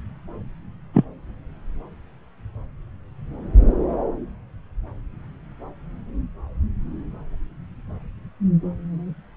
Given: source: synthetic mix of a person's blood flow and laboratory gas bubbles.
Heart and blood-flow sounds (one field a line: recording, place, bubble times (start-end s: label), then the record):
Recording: Doppler ultrasound of blood flow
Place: subclavian vein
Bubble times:
0.94-1.05 s: bubbles
From the record:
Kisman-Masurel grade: 113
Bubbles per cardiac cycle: 1 to 2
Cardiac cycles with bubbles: 1 to 10%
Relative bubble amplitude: loud (0.450 to 0.775)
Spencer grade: 1 (occasional bubble signal discernible with the cardiac motion signal, with majority of cardiac periods free of bubbles)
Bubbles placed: anywhere in the cardiac cycle